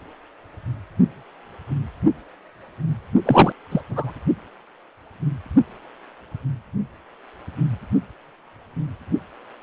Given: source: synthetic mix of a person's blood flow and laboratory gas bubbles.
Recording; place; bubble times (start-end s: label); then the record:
Doppler ultrasound of blood flow; precordium
3.25-3.53 s: bubbles
3.71-3.81 s: bubbles
3.89-4.12 s: bubbles
From the record:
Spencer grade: 1 (occasional bubble signal discernible with the cardiac motion signal, with majority of cardiac periods free of bubbles); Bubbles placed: only in the low amplitude regions of the cardiac cycle